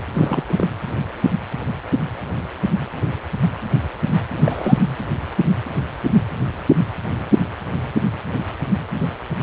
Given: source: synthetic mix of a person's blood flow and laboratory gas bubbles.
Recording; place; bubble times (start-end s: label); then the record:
Doppler ultrasound of blood flow; precordium
0.13-0.43 s: bubbles
0.47-0.69 s: bubbles
4.32-4.86 s: bubbles
From the record:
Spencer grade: 1 (occasional bubble signal discernible with the cardiac motion signal, with majority of cardiac periods free of bubbles); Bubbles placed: anywhere in the cardiac cycle